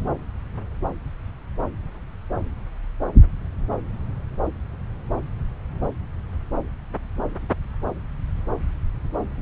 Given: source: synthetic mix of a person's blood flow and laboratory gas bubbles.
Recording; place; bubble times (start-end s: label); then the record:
Doppler ultrasound of blood flow; subclavian vein
no bubbles
From the record:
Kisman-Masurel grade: 000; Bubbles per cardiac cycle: 0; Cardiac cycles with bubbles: 0%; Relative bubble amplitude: no bubbles discernible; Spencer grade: 0 (complete lack of bubble signals)